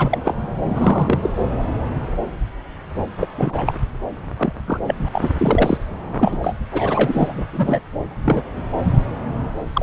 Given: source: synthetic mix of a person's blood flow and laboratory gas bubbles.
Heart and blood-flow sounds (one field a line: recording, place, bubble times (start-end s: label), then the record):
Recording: Doppler ultrasound of blood flow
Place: subclavian vein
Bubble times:
0.00-0.34 s: bubbles
0.65-1.19 s: bubbles
1.23-1.30 s: bubbles
3.19-3.27 s: bubbles
3.36-3.74 s: bubbles
4.38-4.53 s: bubbles
4.66-4.79 s: bubbles
4.87-4.95 s: bubbles
5.00-5.09 s: bubbles
5.12-5.30 s: bubbles
5.38-5.78 s: bubbles
6.19-6.38 s: bubbles
6.42-6.56 s: bubbles
6.73-7.45 s: bubbles
7.53-7.81 s: bubbles
8.25-8.42 s: bubbles
8.72-8.78 s: bubbles
9.73-9.83 s: bubbles
From the record:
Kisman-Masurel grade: 232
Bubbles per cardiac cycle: several, 3 to 8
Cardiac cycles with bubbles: 50 to 99%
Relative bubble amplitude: moderate (0.250 to 0.450)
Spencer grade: 3 (all of the cardiac periods contain showers or single bubble signals, but not dominating or overriding the cardiac motion signals)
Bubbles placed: anywhere in the cardiac cycle